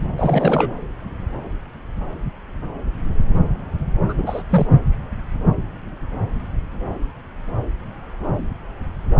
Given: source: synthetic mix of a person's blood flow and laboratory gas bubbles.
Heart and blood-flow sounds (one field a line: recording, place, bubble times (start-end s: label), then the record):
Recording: Doppler ultrasound of blood flow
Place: subclavian vein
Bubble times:
0.17-0.73 s: bubbles
4.08-4.13 s: bubbles
4.17-4.42 s: bubbles
4.49-4.67 s: bubbles
From the record:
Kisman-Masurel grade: 223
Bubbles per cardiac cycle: several, 3 to 8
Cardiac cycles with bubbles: 10 to 50%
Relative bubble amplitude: loud (0.450 to 0.775)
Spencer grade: 2 (many but less than half of the cardiac periods contain bubble signals, singularly or in groups)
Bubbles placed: anywhere in the cardiac cycle